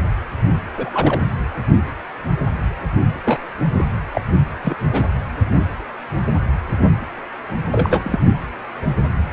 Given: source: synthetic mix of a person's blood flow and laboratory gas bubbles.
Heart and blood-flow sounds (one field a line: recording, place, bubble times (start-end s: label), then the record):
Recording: Doppler ultrasound of blood flow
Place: precordium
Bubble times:
0.76-1.21 s: bubbles
3.24-3.39 s: bubbles
3.73-3.83 s: bubbles
4.12-4.21 s: bubbles
4.63-4.75 s: bubbles
4.92-5.04 s: bubbles
7.71-8.19 s: bubbles
From the record:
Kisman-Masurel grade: 222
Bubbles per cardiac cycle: several, 3 to 8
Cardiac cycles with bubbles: 10 to 50%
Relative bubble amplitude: moderate (0.250 to 0.450)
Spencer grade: 2 (many but less than half of the cardiac periods contain bubble signals, singularly or in groups)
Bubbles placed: anywhere in the cardiac cycle